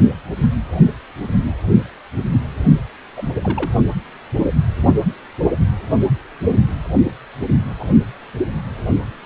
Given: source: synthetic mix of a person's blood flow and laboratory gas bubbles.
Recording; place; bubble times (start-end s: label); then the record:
Doppler ultrasound of blood flow; precordium
3.17-3.29 s: bubbles
3.42-3.71 s: bubbles
7.79-7.84 s: bubbles
From the record:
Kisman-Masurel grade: 122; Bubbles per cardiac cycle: 1 to 2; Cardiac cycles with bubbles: 10 to 50%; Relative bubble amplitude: moderate (0.250 to 0.450); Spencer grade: 2 (many but less than half of the cardiac periods contain bubble signals, singularly or in groups); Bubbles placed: only in the low amplitude regions of the cardiac cycle